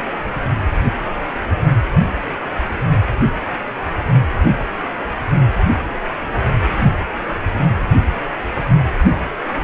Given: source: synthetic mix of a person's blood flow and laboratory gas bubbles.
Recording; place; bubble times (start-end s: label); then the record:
Doppler ultrasound of blood flow; precordium
0.14-0.21 s: bubbles
From the record:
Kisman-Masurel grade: 111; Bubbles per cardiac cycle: 1 to 2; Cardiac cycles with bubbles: 1 to 10%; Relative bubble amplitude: barely perceptible (0.100 to 0.250); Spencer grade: 1 (occasional bubble signal discernible with the cardiac motion signal, with majority of cardiac periods free of bubbles); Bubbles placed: anywhere in the cardiac cycle